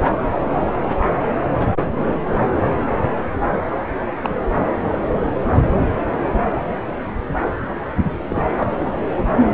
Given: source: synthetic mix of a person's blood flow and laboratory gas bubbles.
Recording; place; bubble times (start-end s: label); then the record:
Doppler ultrasound of blood flow; subclavian vein
4.24-4.29 s: bubbles
4.91-5.01 s: bubbles
8.28-8.42 s: bubbles
8.56-8.70 s: bubbles
From the record:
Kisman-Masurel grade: 122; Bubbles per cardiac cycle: 1 to 2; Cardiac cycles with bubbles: 10 to 50%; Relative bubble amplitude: moderate (0.250 to 0.450); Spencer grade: 2 (many but less than half of the cardiac periods contain bubble signals, singularly or in groups); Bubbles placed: anywhere in the cardiac cycle